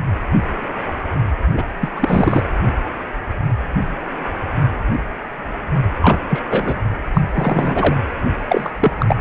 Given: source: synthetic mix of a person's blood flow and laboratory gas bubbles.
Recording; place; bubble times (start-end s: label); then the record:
Doppler ultrasound of blood flow; precordium
1.54-1.62 s: bubbles
1.81-1.89 s: bubbles
1.95-2.49 s: bubbles
6.01-6.18 s: bubbles
6.29-6.42 s: bubbles
6.50-6.79 s: bubbles
7.14-7.21 s: bubbles
7.34-7.95 s: bubbles
8.49-8.71 s: bubbles
8.80-8.92 s: bubbles
9.00-9.16 s: bubbles
From the record:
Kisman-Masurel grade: 233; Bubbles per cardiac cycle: several, 3 to 8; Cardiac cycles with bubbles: 50 to 99%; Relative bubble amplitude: loud (0.450 to 0.775); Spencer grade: 3 (all of the cardiac periods contain showers or single bubble signals, but not dominating or overriding the cardiac motion signals); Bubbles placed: anywhere in the cardiac cycle